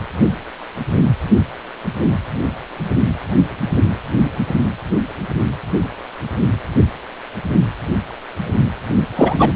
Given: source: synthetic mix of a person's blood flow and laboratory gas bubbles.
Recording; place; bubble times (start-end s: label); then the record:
Doppler ultrasound of blood flow; precordium
9.16-9.52 s: bubbles
From the record:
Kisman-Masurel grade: 213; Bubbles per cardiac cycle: several, 3 to 8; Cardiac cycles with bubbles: 1 to 10%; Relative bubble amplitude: loud (0.450 to 0.775); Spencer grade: 1 (occasional bubble signal discernible with the cardiac motion signal, with majority of cardiac periods free of bubbles); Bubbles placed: only in the low amplitude regions of the cardiac cycle